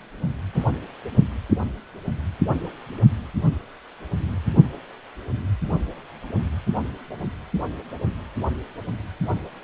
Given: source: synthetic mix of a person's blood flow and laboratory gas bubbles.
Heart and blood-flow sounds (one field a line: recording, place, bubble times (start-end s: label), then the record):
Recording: Doppler ultrasound of blood flow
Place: precordium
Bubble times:
0.55-0.69 s: bubbles
From the record:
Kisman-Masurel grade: 212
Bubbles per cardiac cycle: several, 3 to 8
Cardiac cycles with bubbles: 1 to 10%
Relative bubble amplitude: moderate (0.250 to 0.450)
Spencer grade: 1 (occasional bubble signal discernible with the cardiac motion signal, with majority of cardiac periods free of bubbles)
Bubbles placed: only in the low amplitude regions of the cardiac cycle